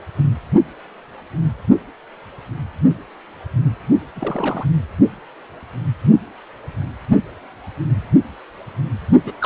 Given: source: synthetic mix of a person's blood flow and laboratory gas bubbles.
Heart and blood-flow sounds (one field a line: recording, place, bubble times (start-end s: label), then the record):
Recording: Doppler ultrasound of blood flow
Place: precordium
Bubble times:
4.16-4.67 s: bubbles
9.24-9.32 s: bubbles
9.39-9.46 s: bubbles
From the record:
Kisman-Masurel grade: 221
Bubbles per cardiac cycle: several, 3 to 8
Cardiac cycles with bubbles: 10 to 50%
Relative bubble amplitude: barely perceptible (0.100 to 0.250)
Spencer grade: 2 (many but less than half of the cardiac periods contain bubble signals, singularly or in groups)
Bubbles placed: anywhere in the cardiac cycle